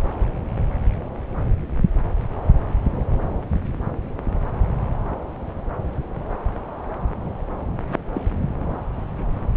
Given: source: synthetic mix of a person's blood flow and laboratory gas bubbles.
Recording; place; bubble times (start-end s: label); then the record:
Doppler ultrasound of blood flow; subclavian vein
8.14-8.22 s: bubbles
From the record:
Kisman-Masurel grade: 111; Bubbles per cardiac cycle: 1 to 2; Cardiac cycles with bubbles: 1 to 10%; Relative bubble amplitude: barely perceptible (0.100 to 0.250); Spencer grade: 1 (occasional bubble signal discernible with the cardiac motion signal, with majority of cardiac periods free of bubbles); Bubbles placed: anywhere in the cardiac cycle